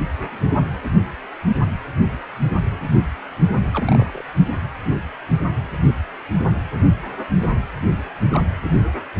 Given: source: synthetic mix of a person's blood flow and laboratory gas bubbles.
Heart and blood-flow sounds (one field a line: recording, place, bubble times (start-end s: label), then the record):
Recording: Doppler ultrasound of blood flow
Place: precordium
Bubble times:
3.72-4.22 s: bubbles
8.32-8.45 s: bubbles
From the record:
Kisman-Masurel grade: 121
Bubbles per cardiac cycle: 1 to 2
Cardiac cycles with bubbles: 10 to 50%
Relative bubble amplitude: barely perceptible (0.100 to 0.250)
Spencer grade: 2 (many but less than half of the cardiac periods contain bubble signals, singularly or in groups)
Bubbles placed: only in the low amplitude regions of the cardiac cycle